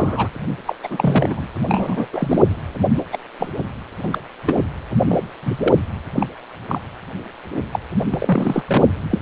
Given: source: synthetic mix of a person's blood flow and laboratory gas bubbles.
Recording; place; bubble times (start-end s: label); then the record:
Doppler ultrasound of blood flow; precordium
0.00-0.29 s: bubbles
0.66-0.76 s: bubbles
0.83-1.47 s: bubbles
1.65-2.07 s: bubbles
2.12-2.43 s: bubbles
2.94-3.03 s: bubbles
3.12-3.18 s: bubbles
3.39-3.49 s: bubbles
4.03-4.19 s: bubbles
4.47-4.62 s: bubbles
5.08-5.21 s: bubbles
5.43-5.73 s: bubbles
6.16-6.27 s: bubbles
6.68-6.79 s: bubbles
7.72-7.79 s: bubbles
8.11-8.64 s: bubbles
8.67-8.91 s: bubbles
9.11-9.19 s: bubbles
From the record:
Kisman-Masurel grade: 242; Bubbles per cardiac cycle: several, 3 to 8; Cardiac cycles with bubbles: 100%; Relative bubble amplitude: moderate (0.250 to 0.450); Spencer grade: 3 (all of the cardiac periods contain showers or single bubble signals, but not dominating or overriding the cardiac motion signals); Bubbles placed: anywhere in the cardiac cycle